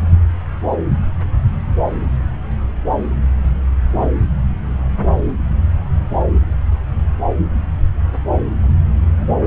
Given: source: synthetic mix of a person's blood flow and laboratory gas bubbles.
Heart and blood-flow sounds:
Doppler ultrasound of blood flow; subclavian vein
no bubbles
From the record:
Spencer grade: 0 (complete lack of bubble signals)

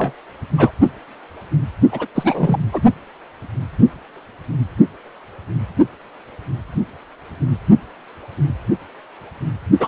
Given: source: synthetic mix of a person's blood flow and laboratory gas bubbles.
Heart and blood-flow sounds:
Doppler ultrasound of blood flow; precordium
0.00-0.14 s: bubbles
0.57-0.71 s: bubbles
1.91-2.07 s: bubbles
2.15-2.59 s: bubbles
2.73-2.81 s: bubbles
9.79-9.88 s: bubbles
From the record:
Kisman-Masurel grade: 223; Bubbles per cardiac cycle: several, 3 to 8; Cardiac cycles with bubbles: 10 to 50%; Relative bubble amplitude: loud (0.450 to 0.775); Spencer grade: 2 (many but less than half of the cardiac periods contain bubble signals, singularly or in groups); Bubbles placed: only in the low amplitude regions of the cardiac cycle

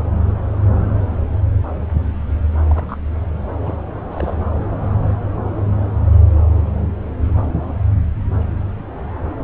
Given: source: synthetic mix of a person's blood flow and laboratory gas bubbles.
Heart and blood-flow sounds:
Doppler ultrasound of blood flow; subclavian vein
2.68-2.97 s: bubbles
3.58-3.76 s: bubbles
4.11-4.35 s: bubbles
From the record:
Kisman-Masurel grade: 221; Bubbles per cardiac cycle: several, 3 to 8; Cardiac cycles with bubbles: 10 to 50%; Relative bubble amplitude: barely perceptible (0.100 to 0.250); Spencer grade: 2 (many but less than half of the cardiac periods contain bubble signals, singularly or in groups); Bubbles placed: anywhere in the cardiac cycle

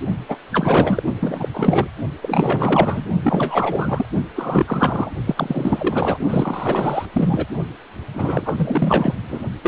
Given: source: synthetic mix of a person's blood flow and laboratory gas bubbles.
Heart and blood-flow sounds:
Doppler ultrasound of blood flow; precordium
0.28-0.36 s: bubbles
0.52-1.03 s: bubbles
1.19-1.48 s: bubbles
1.53-1.87 s: bubbles
2.21-3.10 s: bubbles
3.22-4.06 s: bubbles
4.35-5.12 s: bubbles
5.26-6.18 s: bubbles
6.29-7.05 s: bubbles
7.13-7.46 s: bubbles
8.13-9.15 s: bubbles
9.28-9.39 s: bubbles
9.62-9.68 s: bubbles
From the record:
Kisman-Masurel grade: 444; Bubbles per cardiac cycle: continuous sound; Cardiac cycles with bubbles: 100%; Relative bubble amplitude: maximal (0.775 to 0.999); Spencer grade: 4 (maximum detectable bubble signal sounding continuously throughout systole and diastole of every cardiac period, and overriding the amplitude of the normal cardiac signals); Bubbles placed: only in the low amplitude regions of the cardiac cycle

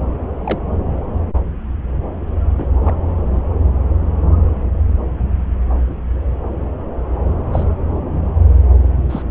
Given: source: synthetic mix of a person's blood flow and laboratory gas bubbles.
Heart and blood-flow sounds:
Doppler ultrasound of blood flow; subclavian vein
0.44-0.58 s: bubbles
2.57-2.68 s: bubbles
2.81-2.96 s: bubbles
5.89-5.94 s: bubbles
7.52-7.66 s: bubbles
9.10-9.23 s: bubbles
From the record:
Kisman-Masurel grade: 122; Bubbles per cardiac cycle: 1 to 2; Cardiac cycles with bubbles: 10 to 50%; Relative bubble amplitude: moderate (0.250 to 0.450); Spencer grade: 2 (many but less than half of the cardiac periods contain bubble signals, singularly or in groups); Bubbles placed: anywhere in the cardiac cycle

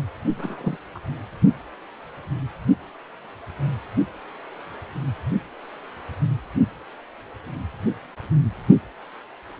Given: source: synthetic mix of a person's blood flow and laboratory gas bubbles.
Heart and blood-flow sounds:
Doppler ultrasound of blood flow; precordium
0.37-0.77 s: bubbles
0.95-0.98 s: bubbles
From the record:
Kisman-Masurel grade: 211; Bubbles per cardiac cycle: several, 3 to 8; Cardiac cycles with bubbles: 1 to 10%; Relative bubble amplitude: barely perceptible (0.100 to 0.250); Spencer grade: 1 (occasional bubble signal discernible with the cardiac motion signal, with majority of cardiac periods free of bubbles); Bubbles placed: only in the low amplitude regions of the cardiac cycle

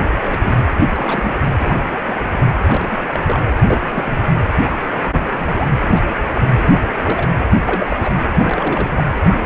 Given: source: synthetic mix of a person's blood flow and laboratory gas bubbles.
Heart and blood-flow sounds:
Doppler ultrasound of blood flow; precordium
0.20-0.61 s: bubbles
0.80-1.34 s: bubbles
1.59-1.76 s: bubbles
2.00-2.15 s: bubbles
2.33-2.38 s: bubbles
2.67-3.01 s: bubbles
3.12-3.20 s: bubbles
3.26-3.39 s: bubbles
3.59-4.21 s: bubbles
4.86-5.22 s: bubbles
5.31-5.77 s: bubbles
5.81-6.02 s: bubbles
6.09-6.41 s: bubbles
6.59-7.00 s: bubbles
7.03-7.29 s: bubbles
7.66-8.26 s: bubbles
8.32-9.04 s: bubbles
9.17-9.46 s: bubbles
From the record:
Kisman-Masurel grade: 242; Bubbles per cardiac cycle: several, 3 to 8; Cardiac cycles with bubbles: 100%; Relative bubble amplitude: moderate (0.250 to 0.450); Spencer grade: 3 (all of the cardiac periods contain showers or single bubble signals, but not dominating or overriding the cardiac motion signals); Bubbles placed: anywhere in the cardiac cycle

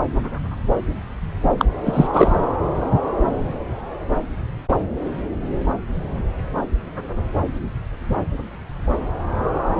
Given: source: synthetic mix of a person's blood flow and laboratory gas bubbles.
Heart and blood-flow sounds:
Doppler ultrasound of blood flow; subclavian vein
1.57-1.65 s: bubbles
1.85-2.08 s: bubbles
2.13-2.36 s: bubbles
From the record:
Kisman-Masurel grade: 213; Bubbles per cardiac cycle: several, 3 to 8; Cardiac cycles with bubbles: 1 to 10%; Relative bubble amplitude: loud (0.450 to 0.775); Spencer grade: 1 (occasional bubble signal discernible with the cardiac motion signal, with majority of cardiac periods free of bubbles); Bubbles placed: anywhere in the cardiac cycle

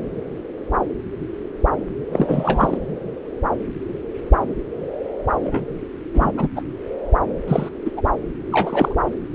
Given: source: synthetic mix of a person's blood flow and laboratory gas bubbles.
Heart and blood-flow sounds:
Doppler ultrasound of blood flow; subclavian vein
2.12-2.77 s: bubbles
5.43-5.60 s: bubbles
6.14-6.31 s: bubbles
6.38-6.48 s: bubbles
6.56-6.62 s: bubbles
7.47-7.69 s: bubbles
7.85-7.91 s: bubbles
7.97-8.02 s: bubbles
8.51-8.95 s: bubbles
From the record:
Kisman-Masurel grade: 223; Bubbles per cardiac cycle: several, 3 to 8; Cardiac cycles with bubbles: 10 to 50%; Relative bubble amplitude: loud (0.450 to 0.775); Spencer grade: 2 (many but less than half of the cardiac periods contain bubble signals, singularly or in groups); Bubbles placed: anywhere in the cardiac cycle

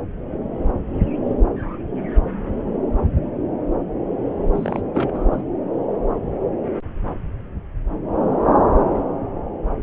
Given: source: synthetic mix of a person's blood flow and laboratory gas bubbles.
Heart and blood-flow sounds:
Doppler ultrasound of blood flow; subclavian vein
4.54-4.82 s: bubbles
4.94-5.42 s: bubbles
From the record:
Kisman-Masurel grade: 211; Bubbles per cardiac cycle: several, 3 to 8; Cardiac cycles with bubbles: 1 to 10%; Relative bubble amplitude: barely perceptible (0.100 to 0.250); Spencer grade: 1 (occasional bubble signal discernible with the cardiac motion signal, with majority of cardiac periods free of bubbles); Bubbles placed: anywhere in the cardiac cycle

